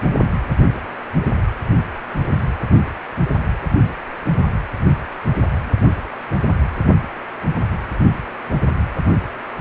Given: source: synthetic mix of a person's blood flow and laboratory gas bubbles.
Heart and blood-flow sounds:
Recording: Doppler ultrasound of blood flow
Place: precordium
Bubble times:
no bubbles
From the record:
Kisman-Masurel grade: 000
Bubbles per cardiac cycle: 0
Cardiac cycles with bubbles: 0%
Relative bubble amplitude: no bubbles discernible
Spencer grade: 0 (complete lack of bubble signals)

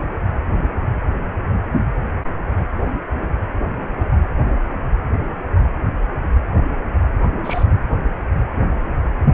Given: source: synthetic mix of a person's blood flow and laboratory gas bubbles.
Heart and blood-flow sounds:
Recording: Doppler ultrasound of blood flow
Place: precordium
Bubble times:
7.42-7.63 s: bubbles
From the record:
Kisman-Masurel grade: 112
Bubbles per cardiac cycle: 1 to 2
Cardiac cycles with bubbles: 1 to 10%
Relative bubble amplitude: moderate (0.250 to 0.450)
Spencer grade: 1 (occasional bubble signal discernible with the cardiac motion signal, with majority of cardiac periods free of bubbles)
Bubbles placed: anywhere in the cardiac cycle

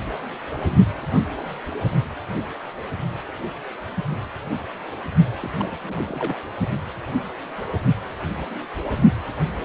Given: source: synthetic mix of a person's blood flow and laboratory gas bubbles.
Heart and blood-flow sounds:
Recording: Doppler ultrasound of blood flow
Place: precordium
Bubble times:
5.40-5.50 s: bubbles
5.59-6.37 s: bubbles
From the record:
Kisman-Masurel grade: 211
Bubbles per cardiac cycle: several, 3 to 8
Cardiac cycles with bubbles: 1 to 10%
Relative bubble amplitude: barely perceptible (0.100 to 0.250)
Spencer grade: 1 (occasional bubble signal discernible with the cardiac motion signal, with majority of cardiac periods free of bubbles)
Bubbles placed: only in the low amplitude regions of the cardiac cycle

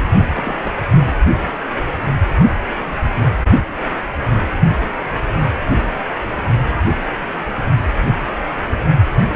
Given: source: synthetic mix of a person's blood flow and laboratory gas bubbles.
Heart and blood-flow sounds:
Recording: Doppler ultrasound of blood flow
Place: precordium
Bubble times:
0.33-0.78 s: bubbles
9.29-9.36 s: bubbles
From the record:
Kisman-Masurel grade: 221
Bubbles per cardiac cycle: several, 3 to 8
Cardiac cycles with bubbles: 10 to 50%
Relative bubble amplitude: barely perceptible (0.100 to 0.250)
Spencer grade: 2 (many but less than half of the cardiac periods contain bubble signals, singularly or in groups)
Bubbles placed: only in the low amplitude regions of the cardiac cycle

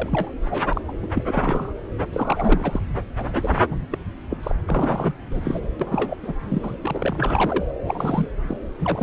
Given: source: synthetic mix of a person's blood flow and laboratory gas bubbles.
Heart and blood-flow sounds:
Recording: Doppler ultrasound of blood flow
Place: subclavian vein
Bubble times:
0.00-0.33 s: bubbles
0.45-0.81 s: bubbles
0.88-0.92 s: bubbles
1.03-1.07 s: bubbles
1.12-1.24 s: bubbles
1.27-1.73 s: bubbles
2.12-2.80 s: bubbles
3.17-3.66 s: bubbles
3.71-3.86 s: bubbles
3.91-3.98 s: bubbles
4.29-4.38 s: bubbles
4.43-4.53 s: bubbles
4.67-5.12 s: bubbles
5.31-5.60 s: bubbles
5.79-6.17 s: bubbles
6.23-6.33 s: bubbles
6.42-6.75 s: bubbles
6.82-7.65 s: bubbles
7.84-8.34 s: bubbles
8.43-8.57 s: bubbles
8.80-9.03 s: bubbles
From the record:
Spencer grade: 3 (all of the cardiac periods contain showers or single bubble signals, but not dominating or overriding the cardiac motion signals)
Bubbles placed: anywhere in the cardiac cycle

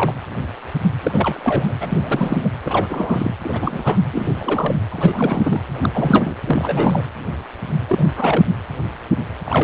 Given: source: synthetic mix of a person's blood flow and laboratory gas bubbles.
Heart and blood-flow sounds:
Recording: Doppler ultrasound of blood flow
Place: precordium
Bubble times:
0.00-0.14 s: bubbles
1.03-1.73 s: bubbles
1.80-2.50 s: bubbles
2.65-2.86 s: bubbles
2.90-3.34 s: bubbles
3.44-4.00 s: bubbles
4.12-4.79 s: bubbles
4.90-5.61 s: bubbles
5.68-6.37 s: bubbles
6.47-7.04 s: bubbles
7.88-8.44 s: bubbles
9.46-9.64 s: bubbles
From the record:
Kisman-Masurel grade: 332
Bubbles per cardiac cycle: rolling drumbeat, 9 or more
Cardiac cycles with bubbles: 50 to 99%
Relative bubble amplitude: moderate (0.250 to 0.450)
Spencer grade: 3 (all of the cardiac periods contain showers or single bubble signals, but not dominating or overriding the cardiac motion signals)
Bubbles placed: anywhere in the cardiac cycle

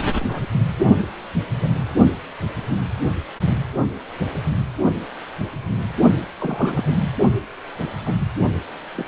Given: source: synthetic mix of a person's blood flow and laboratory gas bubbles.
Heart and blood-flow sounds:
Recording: Doppler ultrasound of blood flow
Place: precordium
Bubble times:
0.20-0.47 s: bubbles
1.51-1.69 s: bubbles
6.39-6.92 s: bubbles
8.05-8.14 s: bubbles
8.95-9.05 s: bubbles
From the record:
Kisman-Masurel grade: 121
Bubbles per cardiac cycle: 1 to 2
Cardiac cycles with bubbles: 10 to 50%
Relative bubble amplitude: barely perceptible (0.100 to 0.250)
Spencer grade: 2 (many but less than half of the cardiac periods contain bubble signals, singularly or in groups)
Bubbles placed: only in the low amplitude regions of the cardiac cycle

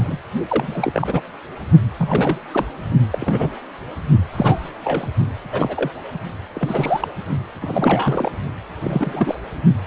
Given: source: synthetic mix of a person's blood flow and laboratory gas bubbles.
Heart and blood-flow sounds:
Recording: Doppler ultrasound of blood flow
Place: precordium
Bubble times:
0.00-0.18 s: bubbles
0.48-1.21 s: bubbles
1.98-2.38 s: bubbles
2.51-2.65 s: bubbles
3.10-3.51 s: bubbles
4.33-4.70 s: bubbles
4.84-5.08 s: bubbles
5.51-5.91 s: bubbles
6.53-7.08 s: bubbles
7.61-8.30 s: bubbles
8.81-9.38 s: bubbles
From the record:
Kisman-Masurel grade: 242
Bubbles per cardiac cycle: several, 3 to 8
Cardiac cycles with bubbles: 100%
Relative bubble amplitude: moderate (0.250 to 0.450)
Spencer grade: 3 (all of the cardiac periods contain showers or single bubble signals, but not dominating or overriding the cardiac motion signals)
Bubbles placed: only in the low amplitude regions of the cardiac cycle

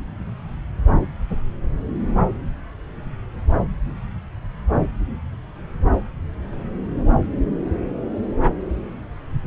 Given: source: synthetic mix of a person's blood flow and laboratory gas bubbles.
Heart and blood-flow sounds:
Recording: Doppler ultrasound of blood flow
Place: subclavian vein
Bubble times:
no bubbles
From the record:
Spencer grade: 0 (complete lack of bubble signals)

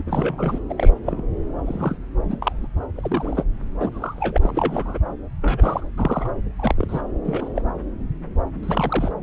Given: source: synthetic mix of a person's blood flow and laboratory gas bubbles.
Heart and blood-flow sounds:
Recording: Doppler ultrasound of blood flow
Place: subclavian vein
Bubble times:
0.00-0.04 s: bubbles
0.07-0.58 s: bubbles
0.70-0.90 s: bubbles
1.05-1.25 s: bubbles
1.66-1.97 s: bubbles
2.28-2.37 s: bubbles
2.42-2.67 s: bubbles
2.96-3.43 s: bubbles
3.79-3.89 s: bubbles
3.92-4.38 s: bubbles
4.42-4.98 s: bubbles
5.42-5.84 s: bubbles
5.97-6.30 s: bubbles
6.58-7.01 s: bubbles
7.23-7.48 s: bubbles
7.55-7.62 s: bubbles
8.62-9.12 s: bubbles
From the record:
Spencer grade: 3 (all of the cardiac periods contain showers or single bubble signals, but not dominating or overriding the cardiac motion signals)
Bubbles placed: anywhere in the cardiac cycle

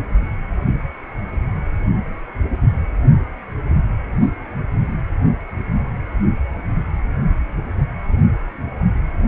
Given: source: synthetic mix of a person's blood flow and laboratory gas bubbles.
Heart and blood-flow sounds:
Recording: Doppler ultrasound of blood flow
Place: precordium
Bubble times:
no bubbles
From the record:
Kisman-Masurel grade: 000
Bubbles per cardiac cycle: 0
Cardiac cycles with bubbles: 0%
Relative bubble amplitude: no bubbles discernible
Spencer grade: 0 (complete lack of bubble signals)

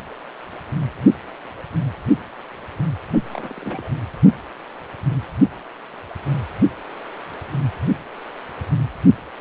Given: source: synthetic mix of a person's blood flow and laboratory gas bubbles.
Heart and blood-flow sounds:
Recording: Doppler ultrasound of blood flow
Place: precordium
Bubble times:
3.13-3.18 s: bubbles
3.31-3.90 s: bubbles
From the record:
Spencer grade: 1 (occasional bubble signal discernible with the cardiac motion signal, with majority of cardiac periods free of bubbles)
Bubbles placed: only in the low amplitude regions of the cardiac cycle

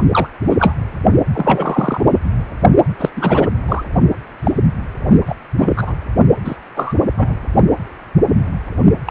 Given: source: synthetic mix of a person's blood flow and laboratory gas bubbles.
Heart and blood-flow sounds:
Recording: Doppler ultrasound of blood flow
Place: precordium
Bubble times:
0.11-0.28 s: bubbles
0.47-0.73 s: bubbles
1.33-2.03 s: bubbles
2.10-2.20 s: bubbles
2.99-3.10 s: bubbles
3.16-3.50 s: bubbles
3.68-3.83 s: bubbles
4.44-4.52 s: bubbles
5.11-5.18 s: bubbles
5.26-5.36 s: bubbles
5.58-5.95 s: bubbles
6.44-6.56 s: bubbles
6.76-6.95 s: bubbles
7.17-7.36 s: bubbles
9.05-9.11 s: bubbles
From the record:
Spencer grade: 3 (all of the cardiac periods contain showers or single bubble signals, but not dominating or overriding the cardiac motion signals)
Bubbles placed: only in the low amplitude regions of the cardiac cycle

